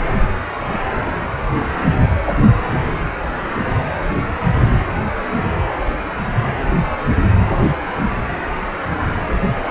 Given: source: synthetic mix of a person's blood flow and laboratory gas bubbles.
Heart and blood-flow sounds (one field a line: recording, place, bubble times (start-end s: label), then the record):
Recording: Doppler ultrasound of blood flow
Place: precordium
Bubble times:
no bubbles
From the record:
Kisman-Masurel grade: 000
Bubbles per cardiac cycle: 0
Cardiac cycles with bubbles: 0%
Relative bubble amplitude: no bubbles discernible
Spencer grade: 0 (complete lack of bubble signals)